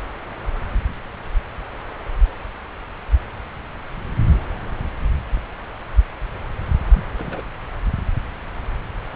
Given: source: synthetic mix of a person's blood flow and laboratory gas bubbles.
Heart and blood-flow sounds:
Doppler ultrasound of blood flow; subclavian vein
6.93-7.03 s: bubbles
7.18-7.42 s: bubbles
From the record:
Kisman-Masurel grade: 111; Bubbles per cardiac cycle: 1 to 2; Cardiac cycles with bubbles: 1 to 10%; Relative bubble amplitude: barely perceptible (0.100 to 0.250); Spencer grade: 1 (occasional bubble signal discernible with the cardiac motion signal, with majority of cardiac periods free of bubbles); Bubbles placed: anywhere in the cardiac cycle

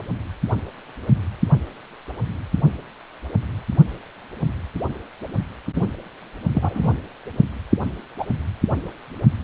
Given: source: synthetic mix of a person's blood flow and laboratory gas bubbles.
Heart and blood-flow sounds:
Doppler ultrasound of blood flow; precordium
5.75-5.82 s: bubbles
6.53-6.92 s: bubbles
8.18-8.27 s: bubbles
From the record:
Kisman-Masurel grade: 123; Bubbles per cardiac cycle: 1 to 2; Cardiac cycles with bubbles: 10 to 50%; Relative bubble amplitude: loud (0.450 to 0.775); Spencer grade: 2 (many but less than half of the cardiac periods contain bubble signals, singularly or in groups); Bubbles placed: only in the low amplitude regions of the cardiac cycle

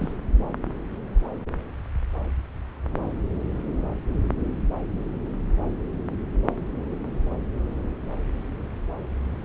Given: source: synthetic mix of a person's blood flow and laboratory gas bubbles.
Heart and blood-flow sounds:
Doppler ultrasound of blood flow; subclavian vein
0.00-0.18 s: bubbles
From the record:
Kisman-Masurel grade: 112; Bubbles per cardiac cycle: 1 to 2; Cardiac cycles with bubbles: 1 to 10%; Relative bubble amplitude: moderate (0.250 to 0.450); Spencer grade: 1 (occasional bubble signal discernible with the cardiac motion signal, with majority of cardiac periods free of bubbles); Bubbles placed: anywhere in the cardiac cycle

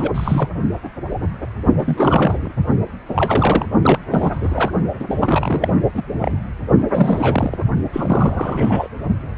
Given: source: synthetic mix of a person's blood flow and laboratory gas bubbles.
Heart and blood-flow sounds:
Doppler ultrasound of blood flow; precordium
0.00-0.49 s: bubbles
1.78-2.52 s: bubbles
3.15-3.66 s: bubbles
3.82-3.98 s: bubbles
4.10-4.71 s: bubbles
4.99-5.04 s: bubbles
5.07-5.73 s: bubbles
5.94-6.02 s: bubbles
6.18-6.39 s: bubbles
6.92-7.56 s: bubbles
7.92-8.88 s: bubbles
From the record:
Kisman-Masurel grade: 332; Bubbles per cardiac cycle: rolling drumbeat, 9 or more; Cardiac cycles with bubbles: 50 to 99%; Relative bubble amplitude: moderate (0.250 to 0.450); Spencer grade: 3 (all of the cardiac periods contain showers or single bubble signals, but not dominating or overriding the cardiac motion signals); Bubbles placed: only in the low amplitude regions of the cardiac cycle

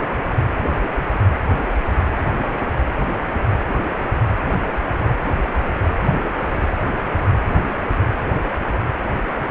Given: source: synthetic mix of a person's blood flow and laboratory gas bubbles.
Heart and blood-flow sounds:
Doppler ultrasound of blood flow; precordium
no bubbles
From the record:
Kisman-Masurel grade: 000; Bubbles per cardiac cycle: 0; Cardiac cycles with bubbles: 0%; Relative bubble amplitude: no bubbles discernible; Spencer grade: 0 (complete lack of bubble signals)

